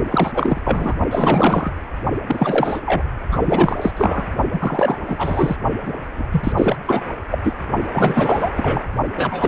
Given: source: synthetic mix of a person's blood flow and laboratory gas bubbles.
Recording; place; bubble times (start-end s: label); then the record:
Doppler ultrasound of blood flow; precordium
0.11-0.32 s: bubbles
0.34-0.61 s: bubbles
0.64-0.95 s: bubbles
1.11-1.71 s: bubbles
2.27-2.81 s: bubbles
2.85-3.03 s: bubbles
3.31-3.91 s: bubbles
3.97-4.28 s: bubbles
4.52-4.98 s: bubbles
5.08-5.57 s: bubbles
5.82-5.95 s: bubbles
6.16-6.25 s: bubbles
6.31-6.53 s: bubbles
6.57-6.77 s: bubbles
6.86-7.05 s: bubbles
7.30-7.39 s: bubbles
7.44-7.54 s: bubbles
7.93-8.50 s: bubbles
8.56-8.84 s: bubbles
9.16-9.48 s: bubbles
From the record:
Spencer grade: 4 (maximum detectable bubble signal sounding continuously throughout systole and diastole of every cardiac period, and overriding the amplitude of the normal cardiac signals); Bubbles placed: only in the low amplitude regions of the cardiac cycle